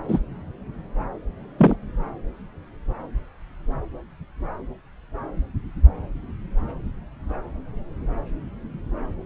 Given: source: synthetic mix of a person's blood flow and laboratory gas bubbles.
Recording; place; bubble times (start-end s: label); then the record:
Doppler ultrasound of blood flow; subclavian vein
0.08-0.19 s: bubbles
1.58-1.76 s: bubbles
From the record:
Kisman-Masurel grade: 123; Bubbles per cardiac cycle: 1 to 2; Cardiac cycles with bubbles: 10 to 50%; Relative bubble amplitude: loud (0.450 to 0.775); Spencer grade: 2 (many but less than half of the cardiac periods contain bubble signals, singularly or in groups); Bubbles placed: anywhere in the cardiac cycle